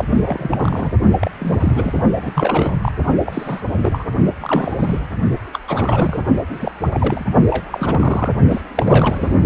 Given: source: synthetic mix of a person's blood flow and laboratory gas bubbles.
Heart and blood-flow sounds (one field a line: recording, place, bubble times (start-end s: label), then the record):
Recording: Doppler ultrasound of blood flow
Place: precordium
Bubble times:
0.00-0.04 s: bubbles
0.10-0.18 s: bubbles
0.25-0.92 s: bubbles
1.20-1.31 s: bubbles
1.40-2.00 s: bubbles
2.16-2.79 s: bubbles
2.82-2.92 s: bubbles
3.25-3.60 s: bubbles
3.83-4.04 s: bubbles
4.40-4.76 s: bubbles
4.79-5.00 s: bubbles
5.53-5.58 s: bubbles
5.65-6.22 s: bubbles
6.47-6.71 s: bubbles
6.80-6.88 s: bubbles
6.93-7.25 s: bubbles
7.48-8.29 s: bubbles
8.50-8.62 s: bubbles
8.75-9.35 s: bubbles
From the record:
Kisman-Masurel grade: 342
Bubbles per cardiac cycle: rolling drumbeat, 9 or more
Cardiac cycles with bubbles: 100%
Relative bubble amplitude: moderate (0.250 to 0.450)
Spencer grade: 3 (all of the cardiac periods contain showers or single bubble signals, but not dominating or overriding the cardiac motion signals)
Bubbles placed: only in the low amplitude regions of the cardiac cycle